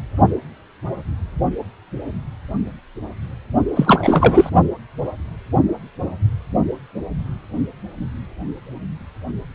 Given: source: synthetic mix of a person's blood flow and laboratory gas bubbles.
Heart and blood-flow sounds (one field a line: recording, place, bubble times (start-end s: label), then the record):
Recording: Doppler ultrasound of blood flow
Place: precordium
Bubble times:
3.75-4.50 s: bubbles
From the record:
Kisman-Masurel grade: 213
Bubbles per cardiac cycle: several, 3 to 8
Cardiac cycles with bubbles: 1 to 10%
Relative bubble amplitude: loud (0.450 to 0.775)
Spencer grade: 1 (occasional bubble signal discernible with the cardiac motion signal, with majority of cardiac periods free of bubbles)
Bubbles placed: only in the low amplitude regions of the cardiac cycle